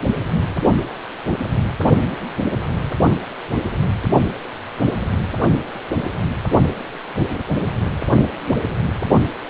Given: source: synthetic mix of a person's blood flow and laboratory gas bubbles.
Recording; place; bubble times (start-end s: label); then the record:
Doppler ultrasound of blood flow; precordium
no bubbles
From the record:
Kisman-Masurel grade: 000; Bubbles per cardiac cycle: 0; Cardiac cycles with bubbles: 0%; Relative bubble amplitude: no bubbles discernible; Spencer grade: 0 (complete lack of bubble signals)